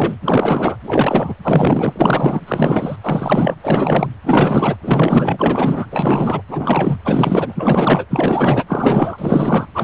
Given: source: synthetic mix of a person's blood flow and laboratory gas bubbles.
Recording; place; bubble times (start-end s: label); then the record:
Doppler ultrasound of blood flow; precordium
0.00-0.16 s: bubbles
0.22-0.77 s: bubbles
0.83-1.33 s: bubbles
1.42-1.93 s: bubbles
1.96-2.96 s: bubbles
3.02-3.54 s: bubbles
3.62-4.11 s: bubbles
4.24-4.76 s: bubbles
4.82-6.42 s: bubbles
6.48-6.99 s: bubbles
7.04-8.05 s: bubbles
8.10-9.66 s: bubbles
9.74-9.84 s: bubbles
From the record:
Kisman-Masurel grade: 444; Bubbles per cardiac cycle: continuous sound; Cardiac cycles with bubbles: 100%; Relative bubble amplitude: maximal (0.775 to 0.999); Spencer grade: 4 (maximum detectable bubble signal sounding continuously throughout systole and diastole of every cardiac period, and overriding the amplitude of the normal cardiac signals); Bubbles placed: anywhere in the cardiac cycle